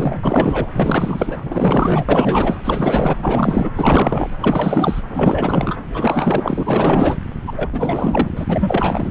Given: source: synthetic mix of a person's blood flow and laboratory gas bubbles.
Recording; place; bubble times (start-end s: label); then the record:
Doppler ultrasound of blood flow; subclavian vein
0.00-0.71 s: bubbles
0.76-1.38 s: bubbles
1.42-2.56 s: bubbles
2.64-3.17 s: bubbles
3.20-3.71 s: bubbles
3.75-4.34 s: bubbles
4.41-5.01 s: bubbles
5.08-5.76 s: bubbles
5.93-7.16 s: bubbles
7.47-7.53 s: bubbles
7.55-7.70 s: bubbles
7.72-8.29 s: bubbles
8.37-9.11 s: bubbles
From the record:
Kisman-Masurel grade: 444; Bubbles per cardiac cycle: continuous sound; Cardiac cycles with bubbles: 100%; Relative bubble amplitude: maximal (0.775 to 0.999); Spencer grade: 4 (maximum detectable bubble signal sounding continuously throughout systole and diastole of every cardiac period, and overriding the amplitude of the normal cardiac signals); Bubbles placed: anywhere in the cardiac cycle